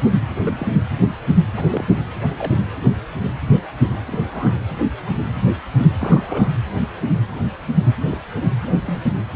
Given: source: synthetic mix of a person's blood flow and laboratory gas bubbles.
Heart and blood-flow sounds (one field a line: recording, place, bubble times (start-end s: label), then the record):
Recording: Doppler ultrasound of blood flow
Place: precordium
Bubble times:
0.43-0.67 s: bubbles
1.02-1.09 s: bubbles
1.57-1.65 s: bubbles
1.70-1.84 s: bubbles
2.36-2.52 s: bubbles
4.08-4.55 s: bubbles
5.99-6.48 s: bubbles
8.11-8.18 s: bubbles
8.66-9.04 s: bubbles
From the record:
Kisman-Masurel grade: 121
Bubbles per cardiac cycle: 1 to 2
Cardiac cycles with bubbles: 10 to 50%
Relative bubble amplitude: barely perceptible (0.100 to 0.250)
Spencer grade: 2 (many but less than half of the cardiac periods contain bubble signals, singularly or in groups)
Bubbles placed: anywhere in the cardiac cycle